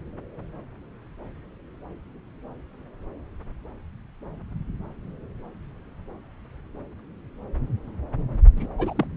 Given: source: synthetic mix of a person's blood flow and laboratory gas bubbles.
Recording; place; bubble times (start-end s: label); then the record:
Doppler ultrasound of blood flow; subclavian vein
8.56-8.67 s: bubbles
8.78-9.07 s: bubbles
From the record:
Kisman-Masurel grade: 222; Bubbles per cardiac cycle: several, 3 to 8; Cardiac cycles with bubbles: 10 to 50%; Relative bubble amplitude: moderate (0.250 to 0.450); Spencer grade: 2 (many but less than half of the cardiac periods contain bubble signals, singularly or in groups); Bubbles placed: anywhere in the cardiac cycle